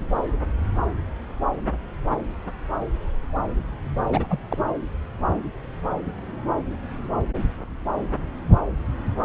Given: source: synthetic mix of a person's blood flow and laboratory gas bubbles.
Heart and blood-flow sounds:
Doppler ultrasound of blood flow; subclavian vein
4.12-4.26 s: bubbles
4.30-4.39 s: bubbles
4.50-4.57 s: bubbles
From the record:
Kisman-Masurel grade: 212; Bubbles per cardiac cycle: several, 3 to 8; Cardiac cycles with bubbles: 1 to 10%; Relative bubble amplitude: moderate (0.250 to 0.450); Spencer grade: 1 (occasional bubble signal discernible with the cardiac motion signal, with majority of cardiac periods free of bubbles); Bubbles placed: anywhere in the cardiac cycle

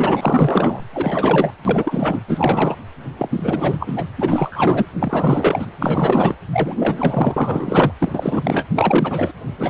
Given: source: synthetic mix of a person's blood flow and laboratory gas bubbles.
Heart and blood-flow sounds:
Doppler ultrasound of blood flow; precordium
0.00-0.84 s: bubbles
0.93-1.50 s: bubbles
1.65-2.22 s: bubbles
2.27-2.77 s: bubbles
3.18-3.29 s: bubbles
3.33-4.03 s: bubbles
4.18-4.86 s: bubbles
4.99-5.67 s: bubbles
5.76-6.36 s: bubbles
6.52-7.92 s: bubbles
8.00-8.67 s: bubbles
8.76-9.33 s: bubbles
9.57-9.70 s: bubbles
From the record:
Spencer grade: 4 (maximum detectable bubble signal sounding continuously throughout systole and diastole of every cardiac period, and overriding the amplitude of the normal cardiac signals); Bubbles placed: anywhere in the cardiac cycle

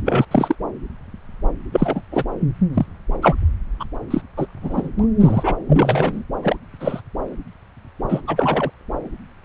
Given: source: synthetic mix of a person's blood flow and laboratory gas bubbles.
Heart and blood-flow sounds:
Doppler ultrasound of blood flow; subclavian vein
0.06-0.25 s: bubbles
0.31-0.55 s: bubbles
1.72-2.02 s: bubbles
2.11-2.24 s: bubbles
2.74-2.86 s: bubbles
3.22-3.35 s: bubbles
3.79-3.85 s: bubbles
4.10-4.22 s: bubbles
4.36-4.47 s: bubbles
4.62-4.90 s: bubbles
4.99-5.06 s: bubbles
5.20-5.57 s: bubbles
5.69-6.24 s: bubbles
6.43-6.57 s: bubbles
6.80-7.01 s: bubbles
8.09-8.21 s: bubbles
8.27-8.71 s: bubbles
From the record:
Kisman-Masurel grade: 233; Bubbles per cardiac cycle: several, 3 to 8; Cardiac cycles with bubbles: 50 to 99%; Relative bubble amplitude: loud (0.450 to 0.775); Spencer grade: 3 (all of the cardiac periods contain showers or single bubble signals, but not dominating or overriding the cardiac motion signals); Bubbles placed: anywhere in the cardiac cycle

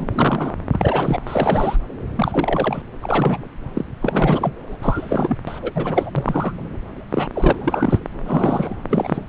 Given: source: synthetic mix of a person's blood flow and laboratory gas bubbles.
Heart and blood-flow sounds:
Doppler ultrasound of blood flow; subclavian vein
0.00-0.54 s: bubbles
0.72-1.20 s: bubbles
1.26-1.76 s: bubbles
2.16-2.83 s: bubbles
3.02-3.43 s: bubbles
3.74-3.85 s: bubbles
4.00-4.53 s: bubbles
4.67-4.77 s: bubbles
4.82-5.37 s: bubbles
5.47-5.72 s: bubbles
5.75-6.12 s: bubbles
6.16-6.53 s: bubbles
7.11-7.28 s: bubbles
7.33-7.53 s: bubbles
7.59-8.00 s: bubbles
8.26-8.76 s: bubbles
8.89-9.23 s: bubbles
From the record:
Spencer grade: 3 (all of the cardiac periods contain showers or single bubble signals, but not dominating or overriding the cardiac motion signals); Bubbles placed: anywhere in the cardiac cycle

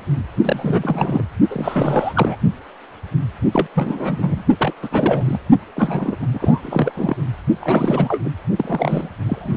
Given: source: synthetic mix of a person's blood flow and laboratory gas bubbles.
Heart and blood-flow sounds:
Doppler ultrasound of blood flow; precordium
0.43-1.23 s: bubbles
1.50-2.37 s: bubbles
3.52-3.67 s: bubbles
3.75-4.42 s: bubbles
4.59-4.74 s: bubbles
4.82-4.88 s: bubbles
4.91-5.38 s: bubbles
5.75-6.16 s: bubbles
6.22-6.27 s: bubbles
6.33-7.17 s: bubbles
7.61-8.31 s: bubbles
8.57-9.10 s: bubbles
9.25-9.57 s: bubbles
From the record:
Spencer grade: 3 (all of the cardiac periods contain showers or single bubble signals, but not dominating or overriding the cardiac motion signals); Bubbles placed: only in the low amplitude regions of the cardiac cycle

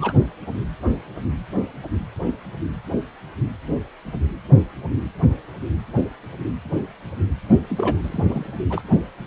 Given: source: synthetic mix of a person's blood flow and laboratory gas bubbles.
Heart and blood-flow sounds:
Doppler ultrasound of blood flow; precordium
0.00-0.13 s: bubbles
7.69-8.46 s: bubbles
8.70-8.81 s: bubbles
From the record:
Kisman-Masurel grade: 221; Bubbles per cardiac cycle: several, 3 to 8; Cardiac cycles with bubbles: 10 to 50%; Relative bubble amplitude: barely perceptible (0.100 to 0.250); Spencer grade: 2 (many but less than half of the cardiac periods contain bubble signals, singularly or in groups); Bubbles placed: only in the low amplitude regions of the cardiac cycle

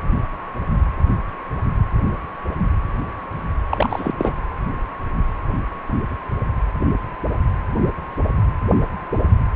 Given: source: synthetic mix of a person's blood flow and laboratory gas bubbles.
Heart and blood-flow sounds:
Doppler ultrasound of blood flow; precordium
3.69-4.12 s: bubbles
4.17-4.32 s: bubbles
From the record:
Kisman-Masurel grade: 212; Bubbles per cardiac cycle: several, 3 to 8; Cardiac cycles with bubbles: 1 to 10%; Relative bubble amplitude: moderate (0.250 to 0.450); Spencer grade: 1 (occasional bubble signal discernible with the cardiac motion signal, with majority of cardiac periods free of bubbles); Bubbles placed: anywhere in the cardiac cycle

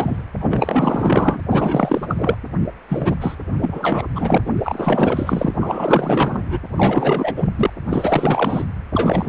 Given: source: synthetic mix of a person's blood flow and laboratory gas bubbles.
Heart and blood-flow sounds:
Doppler ultrasound of blood flow; precordium
0.00-0.22 s: bubbles
0.40-1.40 s: bubbles
1.50-2.36 s: bubbles
2.89-3.15 s: bubbles
3.20-3.35 s: bubbles
3.57-4.08 s: bubbles
4.15-4.38 s: bubbles
4.46-4.52 s: bubbles
4.57-5.54 s: bubbles
5.61-6.59 s: bubbles
6.75-7.50 s: bubbles
7.56-7.70 s: bubbles
7.89-8.64 s: bubbles
8.91-9.29 s: bubbles
From the record:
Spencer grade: 4 (maximum detectable bubble signal sounding continuously throughout systole and diastole of every cardiac period, and overriding the amplitude of the normal cardiac signals); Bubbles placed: anywhere in the cardiac cycle

